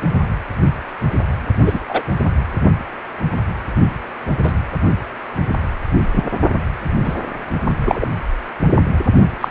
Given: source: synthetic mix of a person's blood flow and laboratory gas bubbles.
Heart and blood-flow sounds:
Doppler ultrasound of blood flow; precordium
1.66-1.79 s: bubbles
1.89-2.02 s: bubbles
4.43-4.54 s: bubbles
6.16-6.23 s: bubbles
7.04-7.14 s: bubbles
7.85-8.06 s: bubbles
9.41-9.51 s: bubbles
From the record:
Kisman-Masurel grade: 123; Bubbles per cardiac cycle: 1 to 2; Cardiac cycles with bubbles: 10 to 50%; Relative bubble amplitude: loud (0.450 to 0.775); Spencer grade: 2 (many but less than half of the cardiac periods contain bubble signals, singularly or in groups); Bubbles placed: only in the low amplitude regions of the cardiac cycle

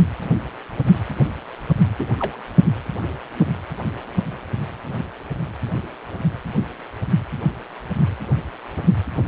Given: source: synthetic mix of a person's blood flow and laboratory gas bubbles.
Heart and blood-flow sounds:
Doppler ultrasound of blood flow; precordium
1.98-2.15 s: bubbles
2.17-2.44 s: bubbles
From the record:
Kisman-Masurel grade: 111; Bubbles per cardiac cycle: 1 to 2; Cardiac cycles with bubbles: 1 to 10%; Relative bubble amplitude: barely perceptible (0.100 to 0.250); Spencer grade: 1 (occasional bubble signal discernible with the cardiac motion signal, with majority of cardiac periods free of bubbles); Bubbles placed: anywhere in the cardiac cycle

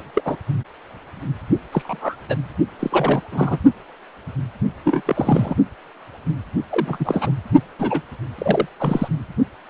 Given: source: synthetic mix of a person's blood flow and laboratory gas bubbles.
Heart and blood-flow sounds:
Doppler ultrasound of blood flow; precordium
0.00-0.03 s: bubbles
0.14-0.22 s: bubbles
0.25-0.36 s: bubbles
1.72-2.17 s: bubbles
2.29-2.35 s: bubbles
2.79-3.21 s: bubbles
3.32-3.58 s: bubbles
4.84-5.02 s: bubbles
5.06-5.55 s: bubbles
6.71-7.31 s: bubbles
7.79-8.02 s: bubbles
8.38-8.67 s: bubbles
8.78-9.08 s: bubbles
From the record:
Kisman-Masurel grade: 232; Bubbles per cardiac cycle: several, 3 to 8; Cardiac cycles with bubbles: 50 to 99%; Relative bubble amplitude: moderate (0.250 to 0.450); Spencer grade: 3 (all of the cardiac periods contain showers or single bubble signals, but not dominating or overriding the cardiac motion signals); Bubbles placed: only in the low amplitude regions of the cardiac cycle

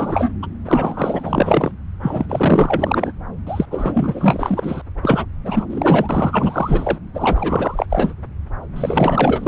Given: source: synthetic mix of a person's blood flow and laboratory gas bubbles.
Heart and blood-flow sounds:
Doppler ultrasound of blood flow; subclavian vein
0.00-0.30 s: bubbles
0.42-0.47 s: bubbles
0.65-1.72 s: bubbles
2.00-3.12 s: bubbles
3.46-3.66 s: bubbles
3.70-4.82 s: bubbles
5.02-5.25 s: bubbles
5.45-5.66 s: bubbles
5.70-6.97 s: bubbles
7.13-7.87 s: bubbles
7.89-8.13 s: bubbles
8.76-9.48 s: bubbles
From the record:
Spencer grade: 4 (maximum detectable bubble signal sounding continuously throughout systole and diastole of every cardiac period, and overriding the amplitude of the normal cardiac signals); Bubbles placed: anywhere in the cardiac cycle

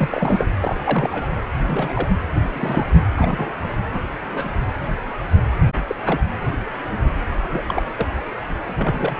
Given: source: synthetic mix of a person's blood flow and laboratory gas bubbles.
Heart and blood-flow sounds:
Doppler ultrasound of blood flow; precordium
0.00-0.47 s: bubbles
0.60-1.42 s: bubbles
1.60-2.08 s: bubbles
2.52-2.87 s: bubbles
3.16-3.53 s: bubbles
3.92-4.02 s: bubbles
4.30-4.53 s: bubbles
5.87-5.96 s: bubbles
6.05-6.20 s: bubbles
7.42-7.83 s: bubbles
7.96-8.06 s: bubbles
8.66-9.20 s: bubbles
From the record:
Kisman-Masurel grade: 232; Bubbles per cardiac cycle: several, 3 to 8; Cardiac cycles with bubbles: 50 to 99%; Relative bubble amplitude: moderate (0.250 to 0.450); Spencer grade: 3 (all of the cardiac periods contain showers or single bubble signals, but not dominating or overriding the cardiac motion signals); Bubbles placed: anywhere in the cardiac cycle

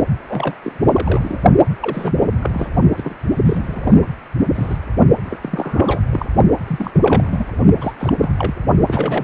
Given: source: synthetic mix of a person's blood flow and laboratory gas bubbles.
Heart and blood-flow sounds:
Doppler ultrasound of blood flow; precordium
0.27-0.55 s: bubbles
0.63-1.41 s: bubbles
1.80-2.12 s: bubbles
2.17-2.37 s: bubbles
2.40-2.67 s: bubbles
2.97-3.15 s: bubbles
3.45-4.14 s: bubbles
4.54-4.77 s: bubbles
5.25-5.38 s: bubbles
5.41-6.02 s: bubbles
6.11-6.25 s: bubbles
6.67-6.91 s: bubbles
6.94-7.48 s: bubbles
7.76-7.93 s: bubbles
7.99-8.13 s: bubbles
8.19-8.34 s: bubbles
8.38-8.54 s: bubbles
8.87-9.24 s: bubbles
From the record:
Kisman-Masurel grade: 332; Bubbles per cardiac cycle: rolling drumbeat, 9 or more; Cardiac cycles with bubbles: 50 to 99%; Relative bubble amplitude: moderate (0.250 to 0.450); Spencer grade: 3 (all of the cardiac periods contain showers or single bubble signals, but not dominating or overriding the cardiac motion signals); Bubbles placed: only in the low amplitude regions of the cardiac cycle

